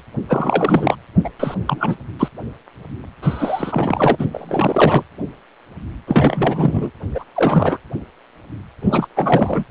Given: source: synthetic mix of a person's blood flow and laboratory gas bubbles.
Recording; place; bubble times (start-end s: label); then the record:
Doppler ultrasound of blood flow; precordium
0.29-0.95 s: bubbles
1.24-1.29 s: bubbles
1.40-1.54 s: bubbles
1.65-1.96 s: bubbles
2.19-2.28 s: bubbles
3.22-4.16 s: bubbles
4.19-4.26 s: bubbles
4.32-5.04 s: bubbles
6.07-6.91 s: bubbles
7.14-7.25 s: bubbles
7.35-7.78 s: bubbles
8.81-9.08 s: bubbles
9.16-9.63 s: bubbles
From the record:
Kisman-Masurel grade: 333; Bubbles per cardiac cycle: rolling drumbeat, 9 or more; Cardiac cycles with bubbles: 50 to 99%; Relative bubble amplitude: loud (0.450 to 0.775); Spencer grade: 3 (all of the cardiac periods contain showers or single bubble signals, but not dominating or overriding the cardiac motion signals); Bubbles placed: anywhere in the cardiac cycle